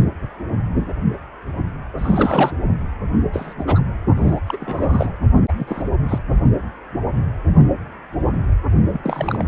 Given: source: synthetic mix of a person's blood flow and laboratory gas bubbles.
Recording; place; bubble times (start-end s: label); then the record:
Doppler ultrasound of blood flow; precordium
1.98-2.52 s: bubbles
3.33-3.54 s: bubbles
3.58-3.64 s: bubbles
3.66-3.83 s: bubbles
4.16-4.40 s: bubbles
4.47-4.58 s: bubbles
4.60-5.12 s: bubbles
5.48-5.53 s: bubbles
5.57-5.82 s: bubbles
6.08-6.19 s: bubbles
8.93-9.01 s: bubbles
9.04-9.45 s: bubbles
From the record:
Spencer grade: 3 (all of the cardiac periods contain showers or single bubble signals, but not dominating or overriding the cardiac motion signals); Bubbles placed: only in the low amplitude regions of the cardiac cycle